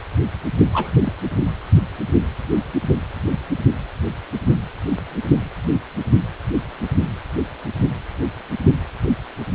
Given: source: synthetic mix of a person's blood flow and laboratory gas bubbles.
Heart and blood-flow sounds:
Doppler ultrasound of blood flow; precordium
0.73-1.12 s: bubbles
From the record:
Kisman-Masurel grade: 111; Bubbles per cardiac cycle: 1 to 2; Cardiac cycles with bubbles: 1 to 10%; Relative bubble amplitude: barely perceptible (0.100 to 0.250); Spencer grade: 1 (occasional bubble signal discernible with the cardiac motion signal, with majority of cardiac periods free of bubbles); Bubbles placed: only in the low amplitude regions of the cardiac cycle

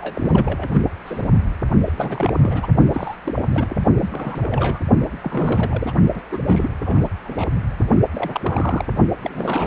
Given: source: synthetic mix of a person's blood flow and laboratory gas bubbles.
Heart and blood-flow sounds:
Doppler ultrasound of blood flow; precordium
0.00-0.69 s: bubbles
0.73-0.83 s: bubbles
1.05-1.40 s: bubbles
1.85-1.93 s: bubbles
1.96-2.35 s: bubbles
2.38-2.67 s: bubbles
2.92-3.15 s: bubbles
3.23-3.48 s: bubbles
3.52-3.77 s: bubbles
4.00-4.79 s: bubbles
5.23-5.93 s: bubbles
6.14-6.22 s: bubbles
6.32-6.39 s: bubbles
6.46-6.68 s: bubbles
6.85-7.09 s: bubbles
7.24-7.48 s: bubbles
8.15-8.85 s: bubbles
9.23-9.67 s: bubbles
From the record:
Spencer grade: 3 (all of the cardiac periods contain showers or single bubble signals, but not dominating or overriding the cardiac motion signals); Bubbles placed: only in the low amplitude regions of the cardiac cycle

